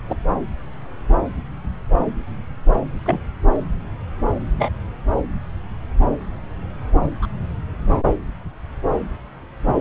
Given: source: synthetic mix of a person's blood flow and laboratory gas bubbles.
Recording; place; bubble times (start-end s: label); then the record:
Doppler ultrasound of blood flow; subclavian vein
0.09-0.16 s: bubbles
2.73-2.80 s: bubbles
3.05-3.20 s: bubbles
4.58-4.72 s: bubbles
7.22-7.26 s: bubbles
From the record:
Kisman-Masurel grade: 122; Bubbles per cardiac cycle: 1 to 2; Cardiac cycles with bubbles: 10 to 50%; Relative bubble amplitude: moderate (0.250 to 0.450); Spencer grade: 2 (many but less than half of the cardiac periods contain bubble signals, singularly or in groups); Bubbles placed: anywhere in the cardiac cycle